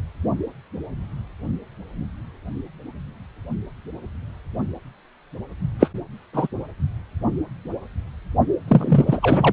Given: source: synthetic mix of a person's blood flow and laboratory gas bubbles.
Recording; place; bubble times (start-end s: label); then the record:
Doppler ultrasound of blood flow; precordium
5.79-5.89 s: bubbles
6.33-6.47 s: bubbles
8.68-9.53 s: bubbles
From the record:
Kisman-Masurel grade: 223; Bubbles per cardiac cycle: several, 3 to 8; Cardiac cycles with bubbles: 10 to 50%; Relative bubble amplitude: loud (0.450 to 0.775); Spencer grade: 2 (many but less than half of the cardiac periods contain bubble signals, singularly or in groups); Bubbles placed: only in the low amplitude regions of the cardiac cycle